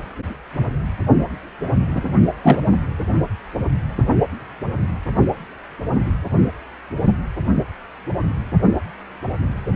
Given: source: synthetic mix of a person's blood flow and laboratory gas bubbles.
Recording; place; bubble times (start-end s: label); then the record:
Doppler ultrasound of blood flow; precordium
1.95-2.14 s: bubbles
2.42-2.62 s: bubbles
From the record:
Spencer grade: 2 (many but less than half of the cardiac periods contain bubble signals, singularly or in groups); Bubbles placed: only in the low amplitude regions of the cardiac cycle